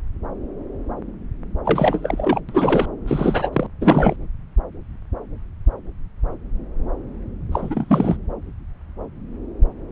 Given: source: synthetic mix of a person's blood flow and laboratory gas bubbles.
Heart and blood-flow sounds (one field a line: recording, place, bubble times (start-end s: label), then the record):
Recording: Doppler ultrasound of blood flow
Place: subclavian vein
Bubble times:
1.65-2.40 s: bubbles
2.49-2.86 s: bubbles
3.08-3.50 s: bubbles
3.53-3.67 s: bubbles
3.81-4.16 s: bubbles
7.52-8.17 s: bubbles
From the record:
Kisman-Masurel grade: 333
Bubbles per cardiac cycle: rolling drumbeat, 9 or more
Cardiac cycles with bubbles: 50 to 99%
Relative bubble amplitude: loud (0.450 to 0.775)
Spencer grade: 3 (all of the cardiac periods contain showers or single bubble signals, but not dominating or overriding the cardiac motion signals)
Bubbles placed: anywhere in the cardiac cycle